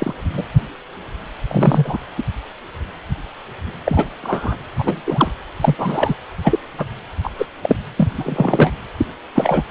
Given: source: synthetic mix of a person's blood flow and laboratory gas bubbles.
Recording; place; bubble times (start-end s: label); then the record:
Doppler ultrasound of blood flow; precordium
0.00-0.14 s: bubbles
0.33-0.43 s: bubbles
1.48-1.98 s: bubbles
2.17-2.23 s: bubbles
3.85-4.09 s: bubbles
4.23-4.56 s: bubbles
4.79-5.01 s: bubbles
5.06-5.32 s: bubbles
5.60-5.75 s: bubbles
5.78-6.14 s: bubbles
6.43-6.59 s: bubbles
6.78-6.86 s: bubbles
7.23-7.30 s: bubbles
7.38-7.46 s: bubbles
7.62-7.76 s: bubbles
7.97-8.08 s: bubbles
8.18-8.73 s: bubbles
8.98-9.06 s: bubbles
9.35-9.64 s: bubbles
From the record:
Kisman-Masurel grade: 233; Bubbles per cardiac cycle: several, 3 to 8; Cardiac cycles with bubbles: 50 to 99%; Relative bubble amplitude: loud (0.450 to 0.775); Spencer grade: 3 (all of the cardiac periods contain showers or single bubble signals, but not dominating or overriding the cardiac motion signals); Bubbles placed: anywhere in the cardiac cycle